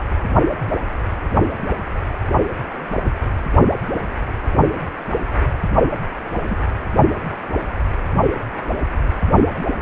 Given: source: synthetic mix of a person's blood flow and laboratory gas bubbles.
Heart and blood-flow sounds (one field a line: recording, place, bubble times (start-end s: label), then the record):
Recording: Doppler ultrasound of blood flow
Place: precordium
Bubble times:
6.49-6.61 s: bubbles
From the record:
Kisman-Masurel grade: 112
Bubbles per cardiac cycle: 1 to 2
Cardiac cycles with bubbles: 1 to 10%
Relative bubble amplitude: moderate (0.250 to 0.450)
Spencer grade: 1 (occasional bubble signal discernible with the cardiac motion signal, with majority of cardiac periods free of bubbles)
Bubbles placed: only in the low amplitude regions of the cardiac cycle